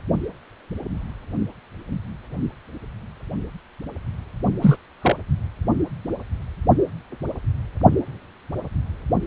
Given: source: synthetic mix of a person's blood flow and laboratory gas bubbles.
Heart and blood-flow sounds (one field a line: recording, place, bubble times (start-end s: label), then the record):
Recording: Doppler ultrasound of blood flow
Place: precordium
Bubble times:
4.61-4.77 s: bubbles
5.02-5.16 s: bubbles
From the record:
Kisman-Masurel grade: 123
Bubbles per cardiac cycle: 1 to 2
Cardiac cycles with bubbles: 10 to 50%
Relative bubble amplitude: loud (0.450 to 0.775)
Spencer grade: 2 (many but less than half of the cardiac periods contain bubble signals, singularly or in groups)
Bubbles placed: only in the low amplitude regions of the cardiac cycle